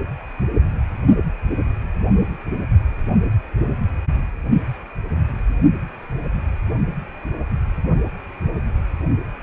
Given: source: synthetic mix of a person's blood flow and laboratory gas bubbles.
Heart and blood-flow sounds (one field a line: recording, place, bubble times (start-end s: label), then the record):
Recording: Doppler ultrasound of blood flow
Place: precordium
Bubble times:
no bubbles
From the record:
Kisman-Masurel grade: 000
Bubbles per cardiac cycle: 0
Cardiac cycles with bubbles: 0%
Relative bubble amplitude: no bubbles discernible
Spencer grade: 0 (complete lack of bubble signals)